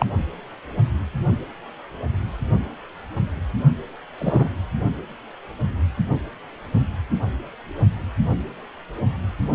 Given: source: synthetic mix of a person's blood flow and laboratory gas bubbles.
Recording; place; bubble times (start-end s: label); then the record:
Doppler ultrasound of blood flow; precordium
0.00-0.06 s: bubbles
4.18-4.49 s: bubbles
From the record:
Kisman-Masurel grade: 123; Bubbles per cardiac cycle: 1 to 2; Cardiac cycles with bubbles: 10 to 50%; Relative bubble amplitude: loud (0.450 to 0.775); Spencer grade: 2 (many but less than half of the cardiac periods contain bubble signals, singularly or in groups); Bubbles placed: only in the low amplitude regions of the cardiac cycle